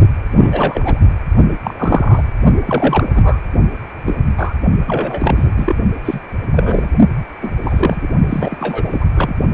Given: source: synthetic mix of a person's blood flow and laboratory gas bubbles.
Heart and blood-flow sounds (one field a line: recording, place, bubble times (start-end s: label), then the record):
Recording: Doppler ultrasound of blood flow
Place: precordium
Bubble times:
0.31-1.00 s: bubbles
1.64-2.23 s: bubbles
2.66-3.41 s: bubbles
4.05-4.14 s: bubbles
4.38-4.53 s: bubbles
4.87-5.74 s: bubbles
6.05-6.20 s: bubbles
6.52-6.90 s: bubbles
7.41-7.52 s: bubbles
7.62-8.10 s: bubbles
8.29-9.06 s: bubbles
9.15-9.33 s: bubbles
9.52-9.54 s: bubbles
From the record:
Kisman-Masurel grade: 243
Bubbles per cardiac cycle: several, 3 to 8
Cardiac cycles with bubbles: 100%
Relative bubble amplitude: loud (0.450 to 0.775)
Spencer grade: 3 (all of the cardiac periods contain showers or single bubble signals, but not dominating or overriding the cardiac motion signals)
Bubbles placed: only in the low amplitude regions of the cardiac cycle